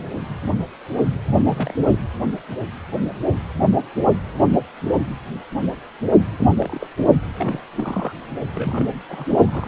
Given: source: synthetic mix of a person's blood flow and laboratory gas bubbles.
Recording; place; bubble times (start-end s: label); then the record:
Doppler ultrasound of blood flow; precordium
1.35-1.42 s: bubbles
1.45-1.74 s: bubbles
1.81-1.98 s: bubbles
6.38-6.48 s: bubbles
6.60-6.87 s: bubbles
7.37-7.60 s: bubbles
7.77-8.12 s: bubbles
8.52-8.87 s: bubbles
9.09-9.25 s: bubbles
9.29-9.68 s: bubbles
From the record:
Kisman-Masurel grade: 221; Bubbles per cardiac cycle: several, 3 to 8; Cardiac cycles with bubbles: 10 to 50%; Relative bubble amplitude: barely perceptible (0.100 to 0.250); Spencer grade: 2 (many but less than half of the cardiac periods contain bubble signals, singularly or in groups); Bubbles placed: anywhere in the cardiac cycle